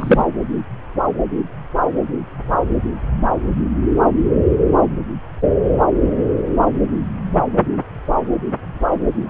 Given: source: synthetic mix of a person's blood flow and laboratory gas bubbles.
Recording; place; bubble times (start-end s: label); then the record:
Doppler ultrasound of blood flow; subclavian vein
0.00-0.25 s: bubbles
From the record:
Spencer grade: 1 (occasional bubble signal discernible with the cardiac motion signal, with majority of cardiac periods free of bubbles); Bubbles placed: anywhere in the cardiac cycle